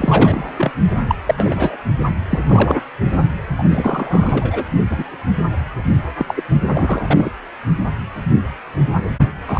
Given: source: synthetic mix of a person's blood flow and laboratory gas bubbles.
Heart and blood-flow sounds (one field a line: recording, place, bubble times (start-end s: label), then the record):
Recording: Doppler ultrasound of blood flow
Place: precordium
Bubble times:
0.00-0.51 s: bubbles
0.58-0.71 s: bubbles
1.08-1.15 s: bubbles
1.27-1.77 s: bubbles
2.29-2.39 s: bubbles
2.48-2.82 s: bubbles
3.58-3.64 s: bubbles
3.70-4.65 s: bubbles
4.89-5.17 s: bubbles
6.18-6.25 s: bubbles
6.28-6.44 s: bubbles
6.65-7.31 s: bubbles
9.47-9.60 s: bubbles
From the record:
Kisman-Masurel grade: 233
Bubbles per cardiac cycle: several, 3 to 8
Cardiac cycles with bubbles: 50 to 99%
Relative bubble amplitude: loud (0.450 to 0.775)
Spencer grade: 3 (all of the cardiac periods contain showers or single bubble signals, but not dominating or overriding the cardiac motion signals)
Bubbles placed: only in the low amplitude regions of the cardiac cycle